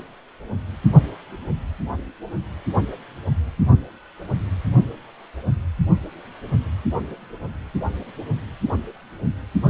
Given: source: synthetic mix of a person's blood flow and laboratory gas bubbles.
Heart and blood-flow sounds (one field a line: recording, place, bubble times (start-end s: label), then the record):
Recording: Doppler ultrasound of blood flow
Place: precordium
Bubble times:
no bubbles
From the record:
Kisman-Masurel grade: 000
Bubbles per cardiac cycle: 0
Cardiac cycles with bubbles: 0%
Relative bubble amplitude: no bubbles discernible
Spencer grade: 0 (complete lack of bubble signals)